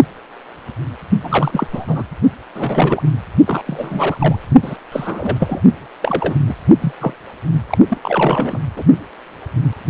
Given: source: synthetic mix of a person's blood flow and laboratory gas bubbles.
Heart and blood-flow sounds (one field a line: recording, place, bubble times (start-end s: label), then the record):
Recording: Doppler ultrasound of blood flow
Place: precordium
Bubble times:
1.23-1.67 s: bubbles
1.73-2.04 s: bubbles
2.54-3.01 s: bubbles
3.46-3.63 s: bubbles
3.67-4.40 s: bubbles
4.62-4.77 s: bubbles
4.92-5.62 s: bubbles
6.03-6.35 s: bubbles
6.47-6.55 s: bubbles
6.80-6.92 s: bubbles
7.00-7.14 s: bubbles
7.70-7.78 s: bubbles
7.88-7.98 s: bubbles
8.03-8.61 s: bubbles
8.77-8.83 s: bubbles
From the record:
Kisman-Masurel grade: 332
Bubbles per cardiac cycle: rolling drumbeat, 9 or more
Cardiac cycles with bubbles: 50 to 99%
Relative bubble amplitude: moderate (0.250 to 0.450)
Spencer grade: 3 (all of the cardiac periods contain showers or single bubble signals, but not dominating or overriding the cardiac motion signals)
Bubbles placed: only in the low amplitude regions of the cardiac cycle